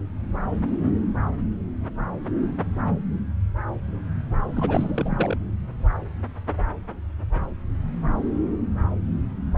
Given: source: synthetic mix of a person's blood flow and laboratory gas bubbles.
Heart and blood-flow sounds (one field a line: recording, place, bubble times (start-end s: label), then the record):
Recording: Doppler ultrasound of blood flow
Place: subclavian vein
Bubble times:
4.54-5.37 s: bubbles
From the record:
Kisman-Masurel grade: 211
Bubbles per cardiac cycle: several, 3 to 8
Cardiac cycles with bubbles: 1 to 10%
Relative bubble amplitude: barely perceptible (0.100 to 0.250)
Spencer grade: 1 (occasional bubble signal discernible with the cardiac motion signal, with majority of cardiac periods free of bubbles)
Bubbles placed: anywhere in the cardiac cycle